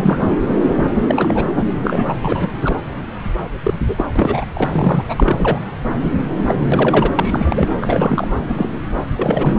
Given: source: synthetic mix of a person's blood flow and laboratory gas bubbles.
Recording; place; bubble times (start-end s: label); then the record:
Doppler ultrasound of blood flow; subclavian vein
0.00-0.39 s: bubbles
1.08-1.46 s: bubbles
1.54-1.65 s: bubbles
1.83-2.14 s: bubbles
2.21-2.49 s: bubbles
2.64-2.75 s: bubbles
3.63-3.74 s: bubbles
3.87-4.04 s: bubbles
4.16-4.46 s: bubbles
4.54-5.03 s: bubbles
5.08-5.58 s: bubbles
6.02-6.09 s: bubbles
6.48-6.56 s: bubbles
6.72-7.12 s: bubbles
7.15-7.69 s: bubbles
7.81-8.27 s: bubbles
8.48-8.69 s: bubbles
9.18-9.53 s: bubbles
9.56-9.59 s: bubbles
From the record:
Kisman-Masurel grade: 242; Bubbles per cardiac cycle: several, 3 to 8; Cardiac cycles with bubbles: 100%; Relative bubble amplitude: moderate (0.250 to 0.450); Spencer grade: 3 (all of the cardiac periods contain showers or single bubble signals, but not dominating or overriding the cardiac motion signals); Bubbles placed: anywhere in the cardiac cycle